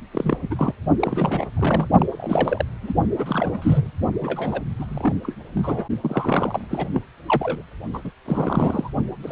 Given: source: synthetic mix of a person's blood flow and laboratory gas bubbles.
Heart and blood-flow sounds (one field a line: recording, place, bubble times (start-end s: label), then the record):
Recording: Doppler ultrasound of blood flow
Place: precordium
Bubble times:
0.11-0.38 s: bubbles
0.41-0.74 s: bubbles
0.99-1.46 s: bubbles
1.56-1.88 s: bubbles
1.98-2.06 s: bubbles
2.12-2.65 s: bubbles
2.83-2.94 s: bubbles
3.18-3.90 s: bubbles
4.21-4.61 s: bubbles
4.79-4.85 s: bubbles
4.88-5.15 s: bubbles
5.23-5.34 s: bubbles
5.54-5.88 s: bubbles
6.02-6.88 s: bubbles
6.93-7.02 s: bubbles
7.26-7.62 s: bubbles
7.93-8.00 s: bubbles
8.04-8.11 s: bubbles
8.25-8.90 s: bubbles
9.23-9.32 s: bubbles
From the record:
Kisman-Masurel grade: 342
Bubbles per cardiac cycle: rolling drumbeat, 9 or more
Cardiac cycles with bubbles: 100%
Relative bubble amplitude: moderate (0.250 to 0.450)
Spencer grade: 3 (all of the cardiac periods contain showers or single bubble signals, but not dominating or overriding the cardiac motion signals)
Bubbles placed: only in the low amplitude regions of the cardiac cycle